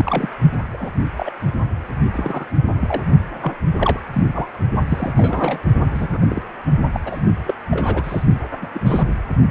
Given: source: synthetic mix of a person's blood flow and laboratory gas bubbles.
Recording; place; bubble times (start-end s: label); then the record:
Doppler ultrasound of blood flow; precordium
0.00-0.28 s: bubbles
0.72-0.92 s: bubbles
1.17-1.31 s: bubbles
2.13-2.48 s: bubbles
2.65-2.74 s: bubbles
2.81-3.02 s: bubbles
3.42-3.52 s: bubbles
3.77-3.99 s: bubbles
4.12-4.27 s: bubbles
4.33-4.48 s: bubbles
4.89-5.12 s: bubbles
5.15-5.64 s: bubbles
5.91-6.08 s: bubbles
6.12-6.19 s: bubbles
6.28-6.42 s: bubbles
6.93-7.00 s: bubbles
7.05-7.22 s: bubbles
7.46-7.55 s: bubbles
7.71-8.22 s: bubbles
8.62-8.66 s: bubbles
8.73-8.80 s: bubbles
8.86-9.03 s: bubbles
From the record:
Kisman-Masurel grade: 242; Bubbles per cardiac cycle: several, 3 to 8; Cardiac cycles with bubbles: 100%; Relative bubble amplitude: moderate (0.250 to 0.450); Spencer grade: 3 (all of the cardiac periods contain showers or single bubble signals, but not dominating or overriding the cardiac motion signals); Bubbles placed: only in the low amplitude regions of the cardiac cycle